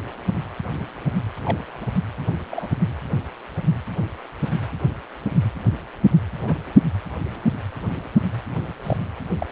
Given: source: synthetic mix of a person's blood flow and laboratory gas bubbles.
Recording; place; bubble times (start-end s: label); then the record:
Doppler ultrasound of blood flow; precordium
1.43-1.58 s: bubbles
1.81-1.87 s: bubbles
2.51-2.69 s: bubbles
6.43-6.57 s: bubbles
8.83-8.96 s: bubbles
9.38-9.46 s: bubbles
From the record:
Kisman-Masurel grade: 121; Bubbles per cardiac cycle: 1 to 2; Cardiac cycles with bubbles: 10 to 50%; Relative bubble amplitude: barely perceptible (0.100 to 0.250); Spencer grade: 2 (many but less than half of the cardiac periods contain bubble signals, singularly or in groups); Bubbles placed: anywhere in the cardiac cycle